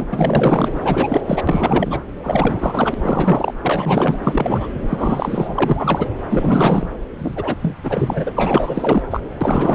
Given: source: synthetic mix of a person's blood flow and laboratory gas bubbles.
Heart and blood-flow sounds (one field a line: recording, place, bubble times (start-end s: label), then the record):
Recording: Doppler ultrasound of blood flow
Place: subclavian vein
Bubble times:
0.00-0.08 s: bubbles
0.11-0.69 s: bubbles
0.84-1.22 s: bubbles
1.27-1.42 s: bubbles
1.47-2.02 s: bubbles
2.23-2.95 s: bubbles
3.01-3.54 s: bubbles
3.62-4.19 s: bubbles
4.23-4.67 s: bubbles
4.88-6.08 s: bubbles
6.29-6.87 s: bubbles
7.18-7.56 s: bubbles
7.61-7.75 s: bubbles
7.83-9.02 s: bubbles
9.11-9.21 s: bubbles
9.40-9.75 s: bubbles
From the record:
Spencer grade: 4 (maximum detectable bubble signal sounding continuously throughout systole and diastole of every cardiac period, and overriding the amplitude of the normal cardiac signals)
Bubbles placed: anywhere in the cardiac cycle